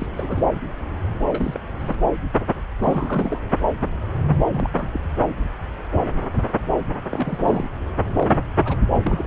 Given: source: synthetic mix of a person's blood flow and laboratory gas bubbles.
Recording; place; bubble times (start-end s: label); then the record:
Doppler ultrasound of blood flow; subclavian vein
0.00-0.07 s: bubbles
0.16-0.43 s: bubbles
1.27-1.60 s: bubbles
1.79-1.96 s: bubbles
2.78-3.42 s: bubbles
4.50-4.70 s: bubbles
4.75-5.00 s: bubbles
7.11-7.38 s: bubbles
7.45-7.68 s: bubbles
8.15-8.45 s: bubbles
8.57-8.77 s: bubbles
9.04-9.27 s: bubbles
From the record:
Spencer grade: 3 (all of the cardiac periods contain showers or single bubble signals, but not dominating or overriding the cardiac motion signals); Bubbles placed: anywhere in the cardiac cycle